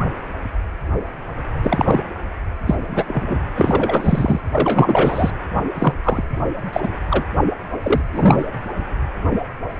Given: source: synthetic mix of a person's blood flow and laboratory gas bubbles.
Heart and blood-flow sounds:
Doppler ultrasound of blood flow; precordium
1.62-2.03 s: bubbles
2.66-3.39 s: bubbles
3.56-4.41 s: bubbles
4.53-5.30 s: bubbles
5.74-5.94 s: bubbles
6.04-6.23 s: bubbles
6.72-6.89 s: bubbles
7.10-7.25 s: bubbles
7.83-8.02 s: bubbles
8.12-8.46 s: bubbles
From the record:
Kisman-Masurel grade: 233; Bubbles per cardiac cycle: several, 3 to 8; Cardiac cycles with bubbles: 50 to 99%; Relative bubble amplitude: loud (0.450 to 0.775); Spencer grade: 3 (all of the cardiac periods contain showers or single bubble signals, but not dominating or overriding the cardiac motion signals); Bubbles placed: anywhere in the cardiac cycle

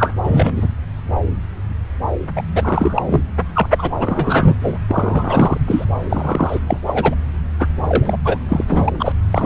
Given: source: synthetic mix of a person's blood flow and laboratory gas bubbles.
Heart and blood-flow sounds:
Doppler ultrasound of blood flow; subclavian vein
0.00-0.12 s: bubbles
0.24-0.68 s: bubbles
2.35-2.42 s: bubbles
2.54-3.02 s: bubbles
3.05-3.22 s: bubbles
3.54-3.91 s: bubbles
4.00-4.56 s: bubbles
4.62-4.79 s: bubbles
4.88-5.57 s: bubbles
5.67-5.84 s: bubbles
6.10-6.59 s: bubbles
6.67-6.79 s: bubbles
6.86-7.15 s: bubbles
7.59-7.68 s: bubbles
7.87-8.16 s: bubbles
8.24-8.38 s: bubbles
8.48-8.64 s: bubbles
8.68-8.90 s: bubbles
8.99-9.13 s: bubbles
9.31-9.46 s: bubbles
From the record:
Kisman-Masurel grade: 333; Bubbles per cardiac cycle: rolling drumbeat, 9 or more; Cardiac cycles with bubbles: 50 to 99%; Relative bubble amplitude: loud (0.450 to 0.775); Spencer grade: 3 (all of the cardiac periods contain showers or single bubble signals, but not dominating or overriding the cardiac motion signals); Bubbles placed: anywhere in the cardiac cycle

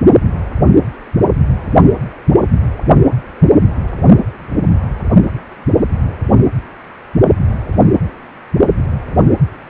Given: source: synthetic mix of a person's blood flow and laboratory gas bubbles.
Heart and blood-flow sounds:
Doppler ultrasound of blood flow; precordium
1.60-1.78 s: bubbles
From the record:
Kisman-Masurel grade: 111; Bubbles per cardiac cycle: 1 to 2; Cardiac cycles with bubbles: 1 to 10%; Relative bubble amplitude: barely perceptible (0.100 to 0.250); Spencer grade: 1 (occasional bubble signal discernible with the cardiac motion signal, with majority of cardiac periods free of bubbles); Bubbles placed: only in the low amplitude regions of the cardiac cycle

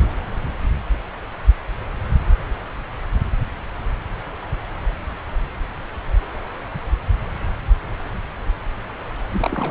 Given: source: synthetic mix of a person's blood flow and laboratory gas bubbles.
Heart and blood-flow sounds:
Doppler ultrasound of blood flow; subclavian vein
9.33-9.71 s: bubbles
From the record:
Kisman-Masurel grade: 211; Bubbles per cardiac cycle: several, 3 to 8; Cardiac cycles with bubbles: 1 to 10%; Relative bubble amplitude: barely perceptible (0.100 to 0.250); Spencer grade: 1 (occasional bubble signal discernible with the cardiac motion signal, with majority of cardiac periods free of bubbles); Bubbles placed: anywhere in the cardiac cycle

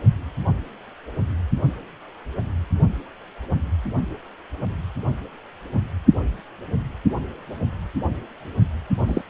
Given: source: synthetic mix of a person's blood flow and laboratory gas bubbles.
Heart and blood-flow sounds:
Doppler ultrasound of blood flow; precordium
9.07-9.21 s: bubbles
From the record:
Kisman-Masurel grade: 212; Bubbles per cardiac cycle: several, 3 to 8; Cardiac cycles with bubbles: 1 to 10%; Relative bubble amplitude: moderate (0.250 to 0.450); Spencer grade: 1 (occasional bubble signal discernible with the cardiac motion signal, with majority of cardiac periods free of bubbles); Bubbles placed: only in the low amplitude regions of the cardiac cycle

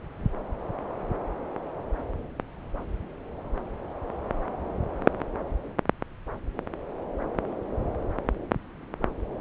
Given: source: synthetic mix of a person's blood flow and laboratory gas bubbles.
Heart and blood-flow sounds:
Doppler ultrasound of blood flow; subclavian vein
no bubbles
From the record:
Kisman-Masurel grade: 000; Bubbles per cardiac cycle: 0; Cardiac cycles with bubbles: 0%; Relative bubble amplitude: no bubbles discernible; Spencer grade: 0 (complete lack of bubble signals)

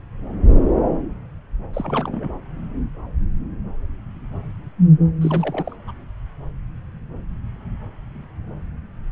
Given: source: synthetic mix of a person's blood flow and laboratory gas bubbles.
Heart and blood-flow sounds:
Doppler ultrasound of blood flow; subclavian vein
1.73-2.29 s: bubbles
5.21-5.75 s: bubbles
5.87-5.92 s: bubbles
From the record:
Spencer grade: 1 (occasional bubble signal discernible with the cardiac motion signal, with majority of cardiac periods free of bubbles); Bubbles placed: anywhere in the cardiac cycle

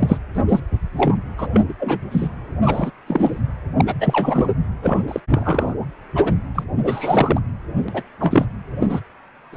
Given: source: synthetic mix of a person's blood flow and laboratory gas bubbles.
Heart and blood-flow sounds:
Doppler ultrasound of blood flow; precordium
0.00-0.19 s: bubbles
0.35-0.38 s: bubbles
0.48-0.60 s: bubbles
0.96-1.18 s: bubbles
1.38-1.48 s: bubbles
1.53-1.61 s: bubbles
1.69-1.74 s: bubbles
1.79-1.99 s: bubbles
2.11-2.28 s: bubbles
2.65-2.91 s: bubbles
3.07-3.41 s: bubbles
3.76-3.94 s: bubbles
4.00-4.48 s: bubbles
4.82-5.20 s: bubbles
5.29-5.75 s: bubbles
6.15-6.33 s: bubbles
6.54-6.63 s: bubbles
6.83-7.40 s: bubbles
7.88-8.03 s: bubbles
8.19-8.46 s: bubbles
8.79-8.87 s: bubbles
8.89-9.01 s: bubbles
9.52-9.57 s: bubbles
From the record:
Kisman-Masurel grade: 243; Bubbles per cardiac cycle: several, 3 to 8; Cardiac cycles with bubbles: 100%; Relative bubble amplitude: loud (0.450 to 0.775); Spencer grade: 3 (all of the cardiac periods contain showers or single bubble signals, but not dominating or overriding the cardiac motion signals); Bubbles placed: anywhere in the cardiac cycle

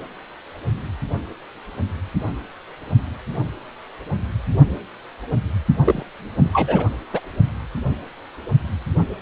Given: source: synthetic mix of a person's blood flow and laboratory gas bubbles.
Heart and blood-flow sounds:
Doppler ultrasound of blood flow; precordium
5.84-6.03 s: bubbles
6.37-6.50 s: bubbles
6.53-6.85 s: bubbles
7.13-7.21 s: bubbles
From the record:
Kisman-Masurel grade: 222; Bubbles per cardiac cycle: several, 3 to 8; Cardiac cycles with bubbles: 10 to 50%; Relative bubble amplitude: moderate (0.250 to 0.450); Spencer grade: 2 (many but less than half of the cardiac periods contain bubble signals, singularly or in groups); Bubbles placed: only in the low amplitude regions of the cardiac cycle

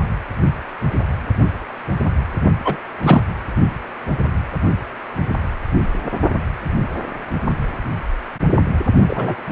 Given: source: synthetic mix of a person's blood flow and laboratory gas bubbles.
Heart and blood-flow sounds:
Doppler ultrasound of blood flow; precordium
2.65-2.77 s: bubbles
3.03-3.22 s: bubbles
9.06-9.36 s: bubbles
9.47-9.52 s: bubbles
From the record:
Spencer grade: 2 (many but less than half of the cardiac periods contain bubble signals, singularly or in groups); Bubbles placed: only in the low amplitude regions of the cardiac cycle

